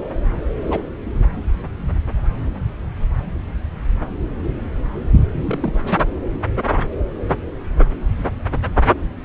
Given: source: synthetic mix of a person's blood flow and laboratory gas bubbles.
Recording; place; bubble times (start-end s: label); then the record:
Doppler ultrasound of blood flow; subclavian vein
0.62-0.83 s: bubbles
1.18-1.26 s: bubbles
5.31-6.08 s: bubbles
From the record:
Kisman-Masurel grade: 221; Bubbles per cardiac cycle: several, 3 to 8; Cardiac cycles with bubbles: 10 to 50%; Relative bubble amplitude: barely perceptible (0.100 to 0.250); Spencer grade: 2 (many but less than half of the cardiac periods contain bubble signals, singularly or in groups); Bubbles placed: anywhere in the cardiac cycle